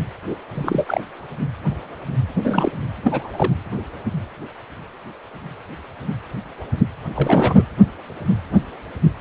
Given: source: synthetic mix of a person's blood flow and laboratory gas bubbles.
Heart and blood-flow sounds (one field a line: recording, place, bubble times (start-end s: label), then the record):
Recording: Doppler ultrasound of blood flow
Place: precordium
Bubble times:
0.29-0.36 s: bubbles
0.54-1.04 s: bubbles
2.31-2.72 s: bubbles
3.04-3.53 s: bubbles
7.16-7.62 s: bubbles
From the record:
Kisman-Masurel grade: 222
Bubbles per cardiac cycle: several, 3 to 8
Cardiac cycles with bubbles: 10 to 50%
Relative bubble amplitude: moderate (0.250 to 0.450)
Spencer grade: 2 (many but less than half of the cardiac periods contain bubble signals, singularly or in groups)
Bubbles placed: anywhere in the cardiac cycle